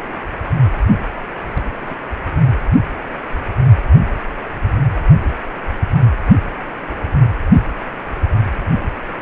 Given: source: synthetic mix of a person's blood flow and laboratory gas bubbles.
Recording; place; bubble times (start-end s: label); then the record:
Doppler ultrasound of blood flow; precordium
1.64-1.95 s: bubbles
6.90-6.94 s: bubbles
7.25-7.30 s: bubbles
From the record:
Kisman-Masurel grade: 121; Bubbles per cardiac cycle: 1 to 2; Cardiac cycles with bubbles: 10 to 50%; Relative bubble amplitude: barely perceptible (0.100 to 0.250); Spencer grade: 2 (many but less than half of the cardiac periods contain bubble signals, singularly or in groups); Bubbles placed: only in the low amplitude regions of the cardiac cycle